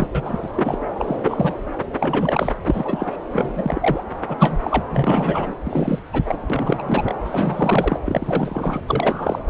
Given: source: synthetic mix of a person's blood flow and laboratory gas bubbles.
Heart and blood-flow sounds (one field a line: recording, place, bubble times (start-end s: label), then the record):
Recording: Doppler ultrasound of blood flow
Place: subclavian vein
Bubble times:
0.00-0.07 s: bubbles
0.15-0.52 s: bubbles
0.57-0.78 s: bubbles
0.97-1.56 s: bubbles
2.00-2.55 s: bubbles
2.65-3.17 s: bubbles
3.33-4.04 s: bubbles
4.28-4.36 s: bubbles
4.39-4.59 s: bubbles
4.62-4.84 s: bubbles
4.89-5.54 s: bubbles
5.65-6.00 s: bubbles
6.12-6.22 s: bubbles
6.25-6.38 s: bubbles
6.50-7.14 s: bubbles
7.24-8.00 s: bubbles
8.06-8.80 s: bubbles
8.88-9.42 s: bubbles
From the record:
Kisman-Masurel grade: 342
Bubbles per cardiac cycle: rolling drumbeat, 9 or more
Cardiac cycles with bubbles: 100%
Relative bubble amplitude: moderate (0.250 to 0.450)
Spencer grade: 3 (all of the cardiac periods contain showers or single bubble signals, but not dominating or overriding the cardiac motion signals)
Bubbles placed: anywhere in the cardiac cycle